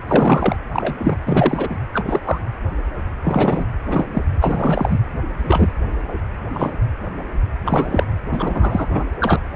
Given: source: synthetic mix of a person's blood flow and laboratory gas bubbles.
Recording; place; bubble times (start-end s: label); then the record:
Doppler ultrasound of blood flow; precordium
0.07-0.56 s: bubbles
0.72-0.95 s: bubbles
0.98-1.17 s: bubbles
1.26-1.78 s: bubbles
1.94-2.21 s: bubbles
2.24-2.39 s: bubbles
3.23-3.66 s: bubbles
3.88-4.06 s: bubbles
4.12-4.22 s: bubbles
4.40-5.00 s: bubbles
5.38-5.72 s: bubbles
6.53-6.72 s: bubbles
7.65-8.05 s: bubbles
8.32-8.87 s: bubbles
8.90-9.04 s: bubbles
9.20-9.39 s: bubbles
9.50-9.56 s: bubbles
From the record:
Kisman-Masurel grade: 233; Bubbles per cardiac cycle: several, 3 to 8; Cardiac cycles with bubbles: 50 to 99%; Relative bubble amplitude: loud (0.450 to 0.775); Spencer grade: 3 (all of the cardiac periods contain showers or single bubble signals, but not dominating or overriding the cardiac motion signals); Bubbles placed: anywhere in the cardiac cycle